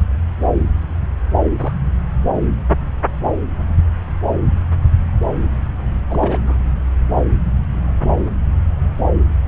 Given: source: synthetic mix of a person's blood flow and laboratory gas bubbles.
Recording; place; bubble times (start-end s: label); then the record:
Doppler ultrasound of blood flow; subclavian vein
1.43-1.75 s: bubbles
6.09-6.56 s: bubbles
From the record:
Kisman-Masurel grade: 221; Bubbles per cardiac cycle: several, 3 to 8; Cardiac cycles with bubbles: 10 to 50%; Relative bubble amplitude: barely perceptible (0.100 to 0.250); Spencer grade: 2 (many but less than half of the cardiac periods contain bubble signals, singularly or in groups); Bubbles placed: anywhere in the cardiac cycle